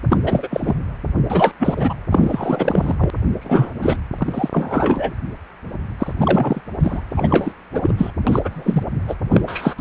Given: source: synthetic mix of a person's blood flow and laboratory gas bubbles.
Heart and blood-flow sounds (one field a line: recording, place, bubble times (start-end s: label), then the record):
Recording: Doppler ultrasound of blood flow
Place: precordium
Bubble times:
0.09-0.17 s: bubbles
0.23-0.75 s: bubbles
1.29-1.52 s: bubbles
1.59-1.94 s: bubbles
2.11-2.95 s: bubbles
2.98-3.10 s: bubbles
3.40-3.72 s: bubbles
3.81-3.97 s: bubbles
4.18-4.49 s: bubbles
4.52-5.12 s: bubbles
5.99-6.12 s: bubbles
6.20-6.61 s: bubbles
6.79-7.06 s: bubbles
7.10-7.54 s: bubbles
7.72-7.94 s: bubbles
7.97-8.11 s: bubbles
8.27-8.83 s: bubbles
9.07-9.15 s: bubbles
9.30-9.42 s: bubbles
9.47-9.74 s: bubbles
9.78-9.81 s: bubbles
From the record:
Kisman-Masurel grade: 343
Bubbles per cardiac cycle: rolling drumbeat, 9 or more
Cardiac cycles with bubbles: 100%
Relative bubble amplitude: loud (0.450 to 0.775)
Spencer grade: 3 (all of the cardiac periods contain showers or single bubble signals, but not dominating or overriding the cardiac motion signals)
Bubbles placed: anywhere in the cardiac cycle